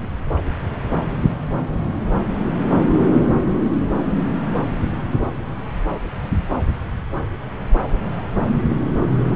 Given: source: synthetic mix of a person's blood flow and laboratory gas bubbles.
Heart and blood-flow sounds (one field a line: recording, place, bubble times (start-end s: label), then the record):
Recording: Doppler ultrasound of blood flow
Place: subclavian vein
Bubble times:
0.01-0.07 s: bubbles
From the record:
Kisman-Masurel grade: 111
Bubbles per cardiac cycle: 1 to 2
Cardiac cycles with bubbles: 1 to 10%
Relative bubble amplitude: barely perceptible (0.100 to 0.250)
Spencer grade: 1 (occasional bubble signal discernible with the cardiac motion signal, with majority of cardiac periods free of bubbles)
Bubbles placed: anywhere in the cardiac cycle